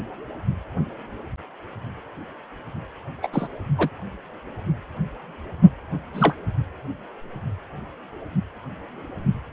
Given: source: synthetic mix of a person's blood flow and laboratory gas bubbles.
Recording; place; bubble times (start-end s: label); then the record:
Doppler ultrasound of blood flow; precordium
3.23-3.27 s: bubbles
3.33-3.48 s: bubbles
3.77-3.89 s: bubbles
6.14-6.34 s: bubbles
From the record:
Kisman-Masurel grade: 123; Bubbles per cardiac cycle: 1 to 2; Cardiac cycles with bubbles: 10 to 50%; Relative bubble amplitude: loud (0.450 to 0.775); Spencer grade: 2 (many but less than half of the cardiac periods contain bubble signals, singularly or in groups); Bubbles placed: only in the low amplitude regions of the cardiac cycle